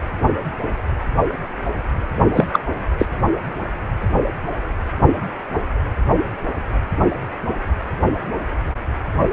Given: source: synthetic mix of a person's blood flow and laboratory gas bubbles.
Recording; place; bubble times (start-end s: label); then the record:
Doppler ultrasound of blood flow; precordium
2.33-2.48 s: bubbles
2.53-2.60 s: bubbles
2.99-3.06 s: bubbles
From the record:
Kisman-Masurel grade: 213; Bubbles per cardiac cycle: several, 3 to 8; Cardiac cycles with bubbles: 1 to 10%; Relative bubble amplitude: loud (0.450 to 0.775); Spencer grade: 1 (occasional bubble signal discernible with the cardiac motion signal, with majority of cardiac periods free of bubbles); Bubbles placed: only in the low amplitude regions of the cardiac cycle